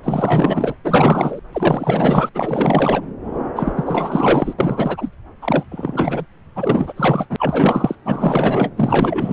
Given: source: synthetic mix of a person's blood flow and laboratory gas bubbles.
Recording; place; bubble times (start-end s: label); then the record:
Doppler ultrasound of blood flow; subclavian vein
0.03-0.74 s: bubbles
0.84-1.40 s: bubbles
1.52-2.30 s: bubbles
2.35-3.04 s: bubbles
3.56-3.73 s: bubbles
3.75-4.54 s: bubbles
4.58-5.10 s: bubbles
5.42-5.64 s: bubbles
5.71-6.26 s: bubbles
6.55-6.93 s: bubbles
6.96-7.25 s: bubbles
7.29-7.36 s: bubbles
7.38-7.96 s: bubbles
8.04-8.70 s: bubbles
8.77-9.33 s: bubbles
From the record:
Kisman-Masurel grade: 444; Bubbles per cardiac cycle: continuous sound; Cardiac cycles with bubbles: 100%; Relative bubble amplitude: maximal (0.775 to 0.999); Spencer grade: 4 (maximum detectable bubble signal sounding continuously throughout systole and diastole of every cardiac period, and overriding the amplitude of the normal cardiac signals); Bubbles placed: anywhere in the cardiac cycle